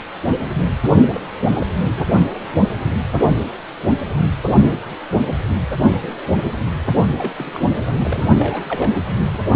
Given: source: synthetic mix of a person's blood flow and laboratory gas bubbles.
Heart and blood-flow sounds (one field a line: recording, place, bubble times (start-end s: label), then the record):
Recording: Doppler ultrasound of blood flow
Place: precordium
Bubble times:
1.14-1.27 s: bubbles
1.59-1.67 s: bubbles
1.94-2.08 s: bubbles
7.17-7.33 s: bubbles
7.36-7.67 s: bubbles
7.92-8.26 s: bubbles
8.40-8.62 s: bubbles
8.69-8.92 s: bubbles
9.33-9.38 s: bubbles
From the record:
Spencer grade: 2 (many but less than half of the cardiac periods contain bubble signals, singularly or in groups)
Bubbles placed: only in the low amplitude regions of the cardiac cycle